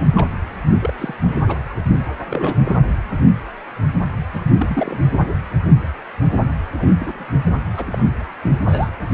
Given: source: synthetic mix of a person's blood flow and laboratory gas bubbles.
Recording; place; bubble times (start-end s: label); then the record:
Doppler ultrasound of blood flow; precordium
0.15-0.29 s: bubbles
0.80-0.94 s: bubbles
0.98-1.15 s: bubbles
1.23-1.39 s: bubbles
1.46-1.59 s: bubbles
2.26-2.58 s: bubbles
2.65-2.79 s: bubbles
4.33-5.32 s: bubbles
6.78-6.95 s: bubbles
7.00-7.36 s: bubbles
7.46-7.51 s: bubbles
7.76-7.86 s: bubbles
7.91-8.04 s: bubbles
8.43-8.52 s: bubbles
8.68-8.89 s: bubbles
From the record:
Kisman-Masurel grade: 232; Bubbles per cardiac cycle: several, 3 to 8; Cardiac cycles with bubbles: 50 to 99%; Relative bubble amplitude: moderate (0.250 to 0.450); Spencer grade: 3 (all of the cardiac periods contain showers or single bubble signals, but not dominating or overriding the cardiac motion signals); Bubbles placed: anywhere in the cardiac cycle